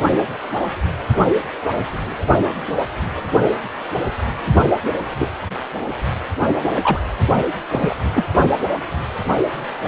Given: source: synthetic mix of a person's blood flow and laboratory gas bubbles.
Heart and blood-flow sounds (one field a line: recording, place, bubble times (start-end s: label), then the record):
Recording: Doppler ultrasound of blood flow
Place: precordium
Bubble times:
5.17-5.29 s: bubbles
6.75-7.00 s: bubbles
7.72-7.95 s: bubbles
8.14-8.24 s: bubbles
From the record:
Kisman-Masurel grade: 122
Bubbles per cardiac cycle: 1 to 2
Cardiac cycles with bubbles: 10 to 50%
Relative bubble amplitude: moderate (0.250 to 0.450)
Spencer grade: 2 (many but less than half of the cardiac periods contain bubble signals, singularly or in groups)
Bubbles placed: only in the low amplitude regions of the cardiac cycle